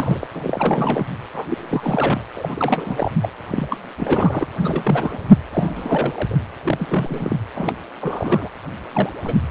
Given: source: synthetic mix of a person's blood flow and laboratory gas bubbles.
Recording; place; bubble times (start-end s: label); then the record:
Doppler ultrasound of blood flow; precordium
0.00-0.27 s: bubbles
0.32-1.06 s: bubbles
1.34-1.46 s: bubbles
1.49-2.19 s: bubbles
2.35-3.11 s: bubbles
3.21-3.29 s: bubbles
3.52-3.77 s: bubbles
3.97-4.47 s: bubbles
4.60-5.37 s: bubbles
5.52-6.37 s: bubbles
6.64-7.37 s: bubbles
7.55-7.74 s: bubbles
8.01-8.49 s: bubbles
8.93-9.10 s: bubbles
9.24-9.35 s: bubbles
From the record:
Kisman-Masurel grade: 332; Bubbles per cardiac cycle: rolling drumbeat, 9 or more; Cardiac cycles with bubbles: 50 to 99%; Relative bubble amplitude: moderate (0.250 to 0.450); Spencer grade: 3 (all of the cardiac periods contain showers or single bubble signals, but not dominating or overriding the cardiac motion signals); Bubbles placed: anywhere in the cardiac cycle